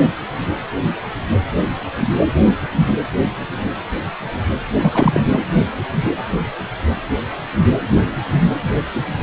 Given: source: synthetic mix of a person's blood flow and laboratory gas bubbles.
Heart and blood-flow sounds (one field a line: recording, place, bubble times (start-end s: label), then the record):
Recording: Doppler ultrasound of blood flow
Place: precordium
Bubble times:
4.82-5.21 s: bubbles
5.32-5.40 s: bubbles
From the record:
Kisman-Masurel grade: 213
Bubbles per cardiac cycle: several, 3 to 8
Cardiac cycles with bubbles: 1 to 10%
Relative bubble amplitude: loud (0.450 to 0.775)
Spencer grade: 1 (occasional bubble signal discernible with the cardiac motion signal, with majority of cardiac periods free of bubbles)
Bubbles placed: anywhere in the cardiac cycle